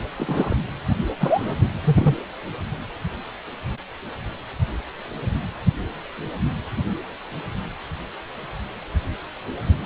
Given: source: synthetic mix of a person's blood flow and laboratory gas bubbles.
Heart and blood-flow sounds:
Doppler ultrasound of blood flow; precordium
0.17-0.56 s: bubbles
1.20-1.55 s: bubbles
1.61-1.69 s: bubbles
1.84-2.15 s: bubbles
From the record:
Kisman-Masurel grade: 222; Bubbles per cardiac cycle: several, 3 to 8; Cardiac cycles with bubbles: 10 to 50%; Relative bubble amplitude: moderate (0.250 to 0.450); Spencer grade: 2 (many but less than half of the cardiac periods contain bubble signals, singularly or in groups); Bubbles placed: anywhere in the cardiac cycle

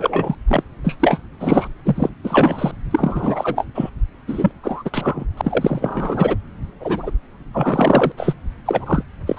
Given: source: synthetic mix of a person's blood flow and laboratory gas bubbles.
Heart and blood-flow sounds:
Doppler ultrasound of blood flow; subclavian vein
0.00-0.35 s: bubbles
0.47-0.64 s: bubbles
0.84-0.97 s: bubbles
0.99-1.19 s: bubbles
1.40-1.68 s: bubbles
1.85-2.10 s: bubbles
2.23-2.72 s: bubbles
2.91-3.66 s: bubbles
3.75-3.90 s: bubbles
4.27-4.51 s: bubbles
4.63-4.90 s: bubbles
4.93-5.24 s: bubbles
5.37-6.36 s: bubbles
6.80-7.11 s: bubbles
7.52-8.12 s: bubbles
8.17-8.33 s: bubbles
8.65-9.03 s: bubbles
9.26-9.39 s: bubbles
From the record:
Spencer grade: 3 (all of the cardiac periods contain showers or single bubble signals, but not dominating or overriding the cardiac motion signals); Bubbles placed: anywhere in the cardiac cycle

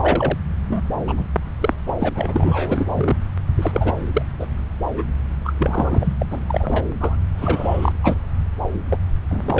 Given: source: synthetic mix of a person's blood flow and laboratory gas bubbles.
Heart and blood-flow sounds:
Doppler ultrasound of blood flow; subclavian vein
0.00-0.38 s: bubbles
0.68-0.85 s: bubbles
1.07-1.14 s: bubbles
1.17-1.25 s: bubbles
1.60-1.74 s: bubbles
1.86-1.94 s: bubbles
2.00-2.09 s: bubbles
2.15-3.15 s: bubbles
3.58-3.94 s: bubbles
4.13-4.22 s: bubbles
4.39-4.46 s: bubbles
4.94-5.04 s: bubbles
5.45-5.53 s: bubbles
5.57-6.14 s: bubbles
6.19-6.26 s: bubbles
6.30-6.40 s: bubbles
6.48-6.84 s: bubbles
7.00-7.16 s: bubbles
7.37-7.92 s: bubbles
8.03-8.18 s: bubbles
8.89-8.97 s: bubbles
9.29-9.60 s: bubbles
From the record:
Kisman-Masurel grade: 342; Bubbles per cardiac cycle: rolling drumbeat, 9 or more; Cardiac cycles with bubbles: 100%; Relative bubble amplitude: moderate (0.250 to 0.450); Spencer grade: 3 (all of the cardiac periods contain showers or single bubble signals, but not dominating or overriding the cardiac motion signals); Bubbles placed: anywhere in the cardiac cycle

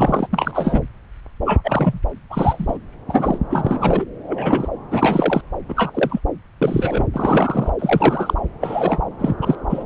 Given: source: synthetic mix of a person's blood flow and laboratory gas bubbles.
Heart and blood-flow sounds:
Doppler ultrasound of blood flow; subclavian vein
0.00-0.28 s: bubbles
0.33-0.81 s: bubbles
1.46-1.99 s: bubbles
2.29-2.78 s: bubbles
3.09-3.38 s: bubbles
3.50-4.05 s: bubbles
4.27-4.68 s: bubbles
4.90-5.41 s: bubbles
5.68-6.20 s: bubbles
6.62-7.05 s: bubbles
7.12-7.71 s: bubbles
7.79-8.34 s: bubbles
8.61-9.00 s: bubbles
9.19-9.34 s: bubbles
9.41-9.55 s: bubbles
9.70-9.83 s: bubbles
From the record:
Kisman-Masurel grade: 243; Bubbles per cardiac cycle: several, 3 to 8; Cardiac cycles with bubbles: 100%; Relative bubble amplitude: loud (0.450 to 0.775); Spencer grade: 3 (all of the cardiac periods contain showers or single bubble signals, but not dominating or overriding the cardiac motion signals); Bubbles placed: anywhere in the cardiac cycle

